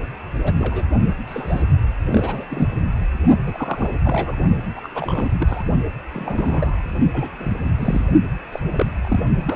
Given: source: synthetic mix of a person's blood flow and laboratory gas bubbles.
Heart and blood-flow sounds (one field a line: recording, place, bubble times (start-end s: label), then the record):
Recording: Doppler ultrasound of blood flow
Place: precordium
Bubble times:
0.42-0.53 s: bubbles
0.58-0.85 s: bubbles
1.27-1.62 s: bubbles
2.11-2.46 s: bubbles
2.50-2.69 s: bubbles
3.46-3.95 s: bubbles
4.03-4.37 s: bubbles
4.76-4.88 s: bubbles
4.95-5.30 s: bubbles
5.40-5.64 s: bubbles
6.14-6.83 s: bubbles
7.14-7.29 s: bubbles
7.39-7.57 s: bubbles
7.64-7.69 s: bubbles
7.79-8.01 s: bubbles
8.52-8.59 s: bubbles
8.72-8.86 s: bubbles
8.96-9.20 s: bubbles
9.45-9.56 s: bubbles
From the record:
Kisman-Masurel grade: 242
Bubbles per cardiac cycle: several, 3 to 8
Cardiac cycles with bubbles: 100%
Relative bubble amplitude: moderate (0.250 to 0.450)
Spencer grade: 3 (all of the cardiac periods contain showers or single bubble signals, but not dominating or overriding the cardiac motion signals)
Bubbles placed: only in the low amplitude regions of the cardiac cycle